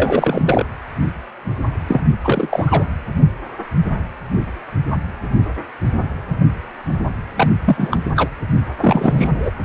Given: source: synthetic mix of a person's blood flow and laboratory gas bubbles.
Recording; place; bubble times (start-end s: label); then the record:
Doppler ultrasound of blood flow; precordium
0.00-0.66 s: bubbles
1.87-2.05 s: bubbles
2.25-2.85 s: bubbles
7.36-7.47 s: bubbles
7.64-7.98 s: bubbles
8.16-8.29 s: bubbles
8.80-9.51 s: bubbles
From the record:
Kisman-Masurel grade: 223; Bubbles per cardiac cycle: several, 3 to 8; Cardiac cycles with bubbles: 10 to 50%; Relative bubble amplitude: loud (0.450 to 0.775); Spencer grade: 2 (many but less than half of the cardiac periods contain bubble signals, singularly or in groups); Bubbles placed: anywhere in the cardiac cycle